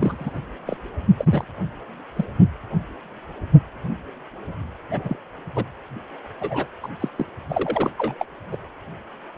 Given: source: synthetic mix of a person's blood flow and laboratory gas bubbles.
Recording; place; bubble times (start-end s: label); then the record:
Doppler ultrasound of blood flow; precordium
0.01-0.39 s: bubbles
0.66-0.77 s: bubbles
1.18-1.44 s: bubbles
2.16-2.25 s: bubbles
4.91-5.17 s: bubbles
5.55-5.64 s: bubbles
6.40-6.67 s: bubbles
6.83-6.88 s: bubbles
7.01-7.08 s: bubbles
7.16-7.26 s: bubbles
7.49-7.91 s: bubbles
7.98-8.14 s: bubbles
8.19-8.25 s: bubbles
8.51-8.56 s: bubbles
From the record:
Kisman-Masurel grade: 232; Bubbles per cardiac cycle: several, 3 to 8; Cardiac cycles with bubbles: 50 to 99%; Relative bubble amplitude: moderate (0.250 to 0.450); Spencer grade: 3 (all of the cardiac periods contain showers or single bubble signals, but not dominating or overriding the cardiac motion signals); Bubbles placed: anywhere in the cardiac cycle